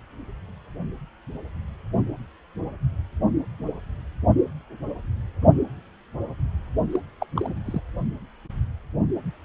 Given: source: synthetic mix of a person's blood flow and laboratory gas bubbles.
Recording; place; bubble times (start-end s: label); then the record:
Doppler ultrasound of blood flow; precordium
6.91-7.00 s: bubbles
7.20-7.27 s: bubbles
7.36-7.53 s: bubbles
7.66-7.81 s: bubbles
From the record:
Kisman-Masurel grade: 211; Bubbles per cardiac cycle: several, 3 to 8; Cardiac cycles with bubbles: 1 to 10%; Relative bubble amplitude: barely perceptible (0.100 to 0.250); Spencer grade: 1 (occasional bubble signal discernible with the cardiac motion signal, with majority of cardiac periods free of bubbles); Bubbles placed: only in the low amplitude regions of the cardiac cycle